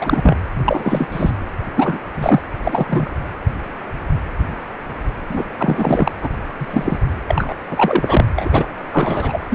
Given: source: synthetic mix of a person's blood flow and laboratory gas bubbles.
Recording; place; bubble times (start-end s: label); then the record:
Doppler ultrasound of blood flow; precordium
0.00-0.36 s: bubbles
0.65-1.07 s: bubbles
1.11-1.47 s: bubbles
1.75-1.99 s: bubbles
2.15-2.42 s: bubbles
2.63-3.15 s: bubbles
5.29-5.46 s: bubbles
5.57-6.12 s: bubbles
6.22-6.29 s: bubbles
6.57-7.00 s: bubbles
7.28-7.54 s: bubbles
7.70-8.27 s: bubbles
8.35-8.49 s: bubbles
8.52-8.66 s: bubbles
8.90-9.40 s: bubbles
9.50-9.55 s: bubbles
From the record:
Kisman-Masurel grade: 233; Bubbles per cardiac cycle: several, 3 to 8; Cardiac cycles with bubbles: 50 to 99%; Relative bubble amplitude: loud (0.450 to 0.775); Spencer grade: 3 (all of the cardiac periods contain showers or single bubble signals, but not dominating or overriding the cardiac motion signals); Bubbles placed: anywhere in the cardiac cycle